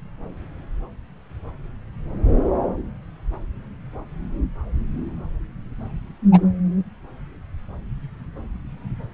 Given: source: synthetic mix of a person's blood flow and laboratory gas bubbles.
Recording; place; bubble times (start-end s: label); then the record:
Doppler ultrasound of blood flow; subclavian vein
6.32-6.41 s: bubbles
From the record:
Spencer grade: 1 (occasional bubble signal discernible with the cardiac motion signal, with majority of cardiac periods free of bubbles); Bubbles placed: anywhere in the cardiac cycle